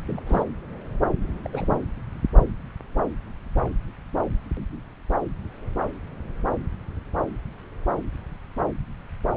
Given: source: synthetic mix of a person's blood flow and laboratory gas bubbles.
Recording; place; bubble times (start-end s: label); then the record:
Doppler ultrasound of blood flow; subclavian vein
0.00-0.02 s: bubbles
0.06-0.21 s: bubbles
0.27-0.44 s: bubbles
1.22-1.81 s: bubbles
From the record:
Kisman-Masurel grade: 211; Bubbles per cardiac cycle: several, 3 to 8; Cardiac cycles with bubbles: 1 to 10%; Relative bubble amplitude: barely perceptible (0.100 to 0.250); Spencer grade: 1 (occasional bubble signal discernible with the cardiac motion signal, with majority of cardiac periods free of bubbles); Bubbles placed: anywhere in the cardiac cycle